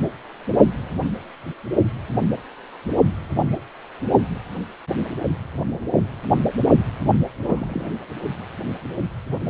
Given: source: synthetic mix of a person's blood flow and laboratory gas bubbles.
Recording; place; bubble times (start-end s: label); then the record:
Doppler ultrasound of blood flow; precordium
7.43-7.91 s: bubbles
From the record:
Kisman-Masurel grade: 221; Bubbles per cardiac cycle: several, 3 to 8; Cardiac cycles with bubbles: 10 to 50%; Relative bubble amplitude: barely perceptible (0.100 to 0.250); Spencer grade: 2 (many but less than half of the cardiac periods contain bubble signals, singularly or in groups); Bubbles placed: only in the low amplitude regions of the cardiac cycle